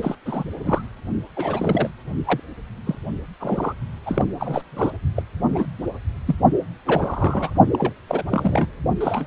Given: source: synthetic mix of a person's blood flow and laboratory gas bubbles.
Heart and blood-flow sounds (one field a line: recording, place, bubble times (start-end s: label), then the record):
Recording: Doppler ultrasound of blood flow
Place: precordium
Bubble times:
0.00-0.15 s: bubbles
0.26-0.44 s: bubbles
0.64-0.82 s: bubbles
1.36-1.90 s: bubbles
2.27-2.40 s: bubbles
2.87-2.95 s: bubbles
3.40-3.73 s: bubbles
4.05-4.26 s: bubbles
4.39-4.69 s: bubbles
4.71-4.90 s: bubbles
5.15-5.22 s: bubbles
5.48-5.66 s: bubbles
6.27-6.35 s: bubbles
6.87-7.52 s: bubbles
7.73-7.93 s: bubbles
8.07-8.23 s: bubbles
8.29-8.68 s: bubbles
9.00-9.27 s: bubbles
From the record:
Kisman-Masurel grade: 242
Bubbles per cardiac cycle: several, 3 to 8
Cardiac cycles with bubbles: 100%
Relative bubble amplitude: moderate (0.250 to 0.450)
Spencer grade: 3 (all of the cardiac periods contain showers or single bubble signals, but not dominating or overriding the cardiac motion signals)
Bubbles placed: only in the low amplitude regions of the cardiac cycle